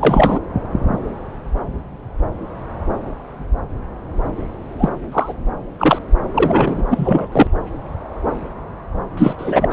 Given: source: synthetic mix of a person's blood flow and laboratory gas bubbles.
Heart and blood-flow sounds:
Doppler ultrasound of blood flow; subclavian vein
0.00-0.40 s: bubbles
4.78-4.89 s: bubbles
5.12-5.33 s: bubbles
5.79-5.99 s: bubbles
6.34-6.84 s: bubbles
6.89-7.27 s: bubbles
7.32-7.47 s: bubbles
9.17-9.36 s: bubbles
9.38-9.72 s: bubbles
From the record:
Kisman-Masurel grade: 223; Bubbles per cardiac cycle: several, 3 to 8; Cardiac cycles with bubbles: 10 to 50%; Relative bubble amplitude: loud (0.450 to 0.775); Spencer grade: 2 (many but less than half of the cardiac periods contain bubble signals, singularly or in groups); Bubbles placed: anywhere in the cardiac cycle

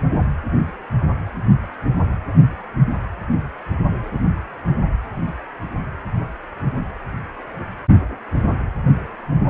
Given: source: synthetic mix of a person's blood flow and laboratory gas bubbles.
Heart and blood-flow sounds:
Doppler ultrasound of blood flow; precordium
no bubbles
From the record:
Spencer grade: 0 (complete lack of bubble signals)

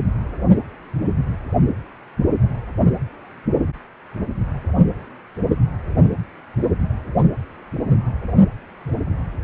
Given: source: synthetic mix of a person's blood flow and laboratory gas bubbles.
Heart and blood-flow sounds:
Doppler ultrasound of blood flow; precordium
no bubbles
From the record:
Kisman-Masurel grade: 000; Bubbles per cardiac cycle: 0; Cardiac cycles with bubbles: 0%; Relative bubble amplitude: no bubbles discernible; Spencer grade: 0 (complete lack of bubble signals)

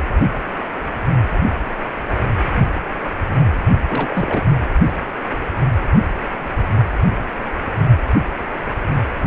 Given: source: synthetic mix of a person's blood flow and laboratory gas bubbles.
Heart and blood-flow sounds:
Doppler ultrasound of blood flow; precordium
3.88-4.44 s: bubbles
From the record:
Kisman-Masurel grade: 212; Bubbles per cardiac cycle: several, 3 to 8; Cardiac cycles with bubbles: 1 to 10%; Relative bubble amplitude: moderate (0.250 to 0.450); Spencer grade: 1 (occasional bubble signal discernible with the cardiac motion signal, with majority of cardiac periods free of bubbles); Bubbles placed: anywhere in the cardiac cycle

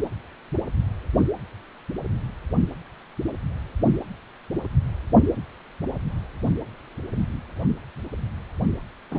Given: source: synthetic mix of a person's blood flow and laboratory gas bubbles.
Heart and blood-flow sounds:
Doppler ultrasound of blood flow; precordium
9.11-9.19 s: bubbles
From the record:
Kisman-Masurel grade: 113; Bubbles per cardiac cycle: 1 to 2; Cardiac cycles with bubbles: 1 to 10%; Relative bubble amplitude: loud (0.450 to 0.775); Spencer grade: 1 (occasional bubble signal discernible with the cardiac motion signal, with majority of cardiac periods free of bubbles); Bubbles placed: only in the low amplitude regions of the cardiac cycle

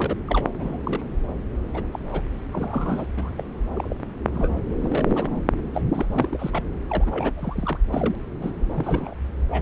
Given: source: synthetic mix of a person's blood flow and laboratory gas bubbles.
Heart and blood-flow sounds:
Doppler ultrasound of blood flow; subclavian vein
0.00-0.16 s: bubbles
0.26-0.48 s: bubbles
0.58-0.78 s: bubbles
0.84-1.02 s: bubbles
1.73-1.86 s: bubbles
1.92-1.99 s: bubbles
2.11-2.23 s: bubbles
2.51-3.06 s: bubbles
3.17-3.30 s: bubbles
3.37-3.44 s: bubbles
3.73-3.96 s: bubbles
4.33-4.60 s: bubbles
4.76-5.42 s: bubbles
5.74-5.81 s: bubbles
5.94-6.63 s: bubbles
6.88-7.78 s: bubbles
7.92-8.15 s: bubbles
8.39-8.56 s: bubbles
8.74-9.14 s: bubbles
9.51-9.62 s: bubbles
From the record:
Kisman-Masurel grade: 242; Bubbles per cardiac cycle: several, 3 to 8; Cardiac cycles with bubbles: 100%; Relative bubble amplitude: moderate (0.250 to 0.450); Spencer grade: 3 (all of the cardiac periods contain showers or single bubble signals, but not dominating or overriding the cardiac motion signals); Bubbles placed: anywhere in the cardiac cycle

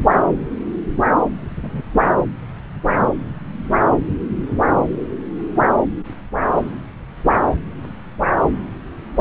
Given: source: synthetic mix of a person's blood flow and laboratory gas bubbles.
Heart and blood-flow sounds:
Doppler ultrasound of blood flow; subclavian vein
1.63-1.82 s: bubbles
From the record:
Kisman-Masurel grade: 111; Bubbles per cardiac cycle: 1 to 2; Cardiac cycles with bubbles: 1 to 10%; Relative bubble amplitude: barely perceptible (0.100 to 0.250); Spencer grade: 1 (occasional bubble signal discernible with the cardiac motion signal, with majority of cardiac periods free of bubbles); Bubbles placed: anywhere in the cardiac cycle

